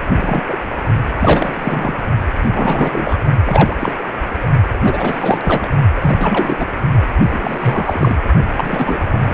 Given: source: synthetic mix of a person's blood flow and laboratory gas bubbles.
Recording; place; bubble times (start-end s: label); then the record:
Doppler ultrasound of blood flow; precordium
0.15-0.44 s: bubbles
0.48-0.56 s: bubbles
1.19-2.06 s: bubbles
2.42-2.50 s: bubbles
2.52-3.17 s: bubbles
3.44-3.77 s: bubbles
3.79-3.92 s: bubbles
3.98-4.04 s: bubbles
4.41-4.48 s: bubbles
4.79-5.72 s: bubbles
5.96-6.66 s: bubbles
7.25-8.16 s: bubbles
8.55-9.00 s: bubbles
9.10-9.34 s: bubbles
From the record:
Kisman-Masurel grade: 343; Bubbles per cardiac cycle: rolling drumbeat, 9 or more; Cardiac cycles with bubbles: 100%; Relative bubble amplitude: loud (0.450 to 0.775); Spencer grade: 3 (all of the cardiac periods contain showers or single bubble signals, but not dominating or overriding the cardiac motion signals); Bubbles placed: only in the low amplitude regions of the cardiac cycle